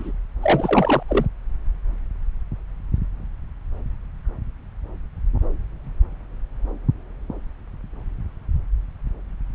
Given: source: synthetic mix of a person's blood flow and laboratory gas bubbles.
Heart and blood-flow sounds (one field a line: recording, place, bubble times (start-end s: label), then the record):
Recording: Doppler ultrasound of blood flow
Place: subclavian vein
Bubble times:
0.00-0.12 s: bubbles
0.42-1.03 s: bubbles
1.08-1.26 s: bubbles
From the record:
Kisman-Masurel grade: 212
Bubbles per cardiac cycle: several, 3 to 8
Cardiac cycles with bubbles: 1 to 10%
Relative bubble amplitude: moderate (0.250 to 0.450)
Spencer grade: 1 (occasional bubble signal discernible with the cardiac motion signal, with majority of cardiac periods free of bubbles)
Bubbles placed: anywhere in the cardiac cycle